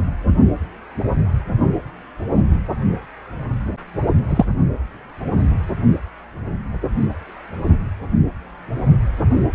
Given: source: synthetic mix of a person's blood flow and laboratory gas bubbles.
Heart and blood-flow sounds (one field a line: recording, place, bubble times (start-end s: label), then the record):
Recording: Doppler ultrasound of blood flow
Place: precordium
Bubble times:
4.29-4.46 s: bubbles
From the record:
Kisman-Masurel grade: 113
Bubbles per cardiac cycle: 1 to 2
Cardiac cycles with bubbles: 1 to 10%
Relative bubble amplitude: loud (0.450 to 0.775)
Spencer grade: 1 (occasional bubble signal discernible with the cardiac motion signal, with majority of cardiac periods free of bubbles)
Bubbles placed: only in the low amplitude regions of the cardiac cycle